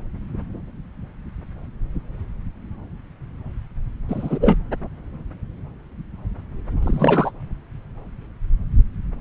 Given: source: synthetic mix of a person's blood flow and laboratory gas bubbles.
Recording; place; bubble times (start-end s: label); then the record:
Doppler ultrasound of blood flow; subclavian vein
4.08-4.57 s: bubbles
6.82-7.31 s: bubbles
From the record:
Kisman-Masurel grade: 223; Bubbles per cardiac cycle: several, 3 to 8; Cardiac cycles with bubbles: 10 to 50%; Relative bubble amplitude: loud (0.450 to 0.775); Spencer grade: 2 (many but less than half of the cardiac periods contain bubble signals, singularly or in groups); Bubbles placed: anywhere in the cardiac cycle